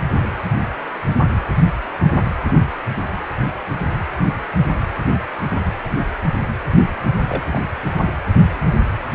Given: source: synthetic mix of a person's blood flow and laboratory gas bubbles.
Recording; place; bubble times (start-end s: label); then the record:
Doppler ultrasound of blood flow; precordium
7.28-7.43 s: bubbles
7.52-7.64 s: bubbles
From the record:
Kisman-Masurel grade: 111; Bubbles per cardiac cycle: 1 to 2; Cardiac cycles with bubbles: 1 to 10%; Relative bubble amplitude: barely perceptible (0.100 to 0.250); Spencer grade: 1 (occasional bubble signal discernible with the cardiac motion signal, with majority of cardiac periods free of bubbles); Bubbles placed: anywhere in the cardiac cycle